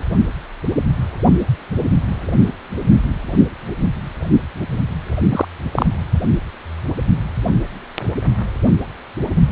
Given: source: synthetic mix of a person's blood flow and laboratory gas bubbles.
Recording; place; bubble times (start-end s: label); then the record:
Doppler ultrasound of blood flow; precordium
5.29-5.45 s: bubbles
5.71-5.86 s: bubbles
From the record:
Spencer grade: 1 (occasional bubble signal discernible with the cardiac motion signal, with majority of cardiac periods free of bubbles); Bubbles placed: anywhere in the cardiac cycle